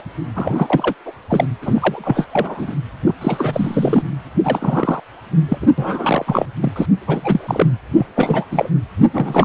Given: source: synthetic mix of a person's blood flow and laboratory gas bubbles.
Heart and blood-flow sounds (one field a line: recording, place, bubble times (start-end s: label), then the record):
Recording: Doppler ultrasound of blood flow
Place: precordium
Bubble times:
0.34-0.94 s: bubbles
1.05-1.12 s: bubbles
1.29-1.46 s: bubbles
1.61-2.75 s: bubbles
3.06-3.15 s: bubbles
3.21-4.03 s: bubbles
4.43-5.00 s: bubbles
5.49-5.58 s: bubbles
5.62-5.67 s: bubbles
5.78-6.46 s: bubbles
6.62-6.70 s: bubbles
6.76-6.86 s: bubbles
7.07-7.67 s: bubbles
7.96-8.06 s: bubbles
8.16-8.47 s: bubbles
8.51-8.70 s: bubbles
8.98-9.09 s: bubbles
9.13-9.45 s: bubbles
From the record:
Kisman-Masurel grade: 343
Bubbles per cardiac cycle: rolling drumbeat, 9 or more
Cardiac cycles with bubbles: 100%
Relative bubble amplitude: loud (0.450 to 0.775)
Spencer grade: 3 (all of the cardiac periods contain showers or single bubble signals, but not dominating or overriding the cardiac motion signals)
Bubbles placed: anywhere in the cardiac cycle